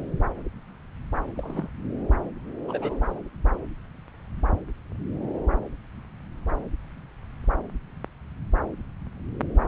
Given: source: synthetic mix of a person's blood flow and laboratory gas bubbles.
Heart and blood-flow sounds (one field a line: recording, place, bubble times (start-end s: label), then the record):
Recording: Doppler ultrasound of blood flow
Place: subclavian vein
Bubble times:
1.35-1.68 s: bubbles
2.68-2.97 s: bubbles
From the record:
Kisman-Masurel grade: 121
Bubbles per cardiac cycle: 1 to 2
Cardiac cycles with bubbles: 10 to 50%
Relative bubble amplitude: barely perceptible (0.100 to 0.250)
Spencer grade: 2 (many but less than half of the cardiac periods contain bubble signals, singularly or in groups)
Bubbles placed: anywhere in the cardiac cycle